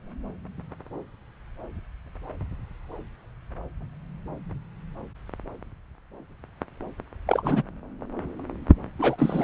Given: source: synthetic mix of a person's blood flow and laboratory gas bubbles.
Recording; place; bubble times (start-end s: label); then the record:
Doppler ultrasound of blood flow; subclavian vein
7.28-7.63 s: bubbles
8.98-9.44 s: bubbles
From the record:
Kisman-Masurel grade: 212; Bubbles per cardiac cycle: several, 3 to 8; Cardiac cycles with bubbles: 1 to 10%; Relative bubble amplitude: moderate (0.250 to 0.450); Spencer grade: 1 (occasional bubble signal discernible with the cardiac motion signal, with majority of cardiac periods free of bubbles); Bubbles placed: anywhere in the cardiac cycle